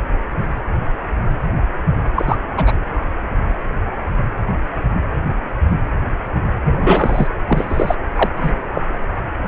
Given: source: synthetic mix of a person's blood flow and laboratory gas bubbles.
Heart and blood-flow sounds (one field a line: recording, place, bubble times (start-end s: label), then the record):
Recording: Doppler ultrasound of blood flow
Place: precordium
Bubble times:
2.15-2.37 s: bubbles
2.56-2.79 s: bubbles
6.64-7.27 s: bubbles
7.47-7.95 s: bubbles
8.15-8.29 s: bubbles
8.37-8.52 s: bubbles
8.73-8.88 s: bubbles
From the record:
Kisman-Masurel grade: 223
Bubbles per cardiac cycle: several, 3 to 8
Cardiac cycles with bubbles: 10 to 50%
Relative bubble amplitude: loud (0.450 to 0.775)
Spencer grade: 2 (many but less than half of the cardiac periods contain bubble signals, singularly or in groups)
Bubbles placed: anywhere in the cardiac cycle